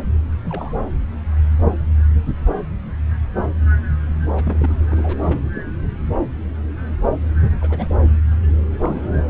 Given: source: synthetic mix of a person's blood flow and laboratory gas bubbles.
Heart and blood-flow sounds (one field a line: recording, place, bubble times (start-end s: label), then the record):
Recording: Doppler ultrasound of blood flow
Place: subclavian vein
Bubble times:
0.45-0.77 s: bubbles
4.36-4.75 s: bubbles
4.88-5.17 s: bubbles
5.22-5.47 s: bubbles
5.54-5.62 s: bubbles
7.61-7.95 s: bubbles
8.79-9.20 s: bubbles
From the record:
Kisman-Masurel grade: 221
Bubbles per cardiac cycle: several, 3 to 8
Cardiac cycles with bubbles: 10 to 50%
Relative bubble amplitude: barely perceptible (0.100 to 0.250)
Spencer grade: 2 (many but less than half of the cardiac periods contain bubble signals, singularly or in groups)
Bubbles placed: anywhere in the cardiac cycle